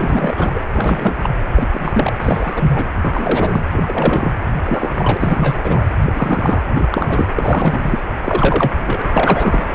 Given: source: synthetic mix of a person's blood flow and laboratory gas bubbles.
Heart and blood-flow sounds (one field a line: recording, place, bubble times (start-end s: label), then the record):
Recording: Doppler ultrasound of blood flow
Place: precordium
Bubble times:
0.00-0.64 s: bubbles
0.73-1.18 s: bubbles
1.22-1.29 s: bubbles
1.55-1.67 s: bubbles
1.72-2.13 s: bubbles
2.21-2.84 s: bubbles
3.02-3.65 s: bubbles
3.72-4.32 s: bubbles
4.65-5.84 s: bubbles
6.00-6.63 s: bubbles
6.75-6.87 s: bubbles
6.92-7.30 s: bubbles
7.35-8.05 s: bubbles
8.25-8.71 s: bubbles
8.79-9.02 s: bubbles
9.13-9.65 s: bubbles
From the record:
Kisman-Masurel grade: 343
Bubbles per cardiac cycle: rolling drumbeat, 9 or more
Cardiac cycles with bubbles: 100%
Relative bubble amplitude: loud (0.450 to 0.775)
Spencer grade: 3 (all of the cardiac periods contain showers or single bubble signals, but not dominating or overriding the cardiac motion signals)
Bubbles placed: anywhere in the cardiac cycle